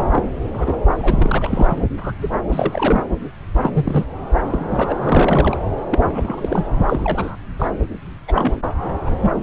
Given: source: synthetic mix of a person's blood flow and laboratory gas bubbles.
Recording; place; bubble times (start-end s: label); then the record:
Doppler ultrasound of blood flow; subclavian vein
0.13-0.23 s: bubbles
0.54-0.77 s: bubbles
0.99-1.82 s: bubbles
2.00-2.12 s: bubbles
2.21-2.29 s: bubbles
2.52-3.02 s: bubbles
3.54-3.71 s: bubbles
3.73-4.06 s: bubbles
4.36-4.42 s: bubbles
4.50-4.98 s: bubbles
5.02-5.58 s: bubbles
5.91-5.99 s: bubbles
6.03-6.65 s: bubbles
6.87-7.36 s: bubbles
7.59-7.68 s: bubbles
8.28-8.61 s: bubbles
9.05-9.10 s: bubbles
9.21-9.31 s: bubbles
From the record:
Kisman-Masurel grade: 242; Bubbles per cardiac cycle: several, 3 to 8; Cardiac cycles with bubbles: 100%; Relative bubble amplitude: moderate (0.250 to 0.450); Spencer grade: 3 (all of the cardiac periods contain showers or single bubble signals, but not dominating or overriding the cardiac motion signals); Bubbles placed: anywhere in the cardiac cycle